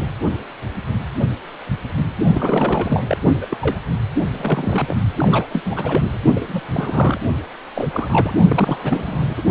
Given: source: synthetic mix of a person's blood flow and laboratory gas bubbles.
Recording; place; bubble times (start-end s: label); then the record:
Doppler ultrasound of blood flow; precordium
2.34-3.04 s: bubbles
3.08-3.18 s: bubbles
3.41-3.46 s: bubbles
3.50-3.57 s: bubbles
3.60-3.79 s: bubbles
4.31-4.96 s: bubbles
5.17-5.62 s: bubbles
5.65-6.18 s: bubbles
6.34-6.62 s: bubbles
6.71-7.21 s: bubbles
7.75-7.88 s: bubbles
7.92-8.34 s: bubbles
8.48-9.42 s: bubbles
From the record:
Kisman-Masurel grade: 332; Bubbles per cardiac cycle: rolling drumbeat, 9 or more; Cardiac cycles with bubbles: 50 to 99%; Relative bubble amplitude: moderate (0.250 to 0.450); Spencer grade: 3 (all of the cardiac periods contain showers or single bubble signals, but not dominating or overriding the cardiac motion signals); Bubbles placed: only in the low amplitude regions of the cardiac cycle